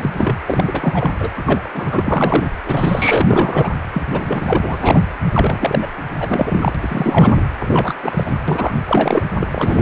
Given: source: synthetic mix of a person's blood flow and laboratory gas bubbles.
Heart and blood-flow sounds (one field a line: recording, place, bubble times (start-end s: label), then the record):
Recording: Doppler ultrasound of blood flow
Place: precordium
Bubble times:
0.00-0.36 s: bubbles
0.46-1.10 s: bubbles
1.19-1.29 s: bubbles
1.38-1.69 s: bubbles
1.73-2.50 s: bubbles
2.66-3.73 s: bubbles
3.94-4.03 s: bubbles
4.11-5.03 s: bubbles
5.34-5.91 s: bubbles
6.18-6.76 s: bubbles
6.79-7.42 s: bubbles
7.59-7.94 s: bubbles
8.02-8.33 s: bubbles
8.47-8.72 s: bubbles
8.87-9.23 s: bubbles
9.36-9.82 s: bubbles
From the record:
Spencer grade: 3 (all of the cardiac periods contain showers or single bubble signals, but not dominating or overriding the cardiac motion signals)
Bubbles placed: anywhere in the cardiac cycle